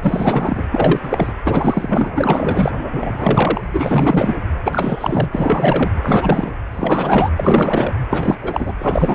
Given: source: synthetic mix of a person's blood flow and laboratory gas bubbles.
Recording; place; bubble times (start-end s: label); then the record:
Doppler ultrasound of blood flow; precordium
0.00-0.64 s: bubbles
0.71-1.35 s: bubbles
1.44-2.12 s: bubbles
2.15-2.72 s: bubbles
2.92-3.61 s: bubbles
3.73-4.35 s: bubbles
4.64-5.27 s: bubbles
5.31-5.91 s: bubbles
6.02-6.52 s: bubbles
6.71-7.30 s: bubbles
7.36-7.93 s: bubbles
8.10-8.38 s: bubbles
8.42-8.75 s: bubbles
8.79-9.15 s: bubbles
From the record:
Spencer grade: 4 (maximum detectable bubble signal sounding continuously throughout systole and diastole of every cardiac period, and overriding the amplitude of the normal cardiac signals); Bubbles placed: anywhere in the cardiac cycle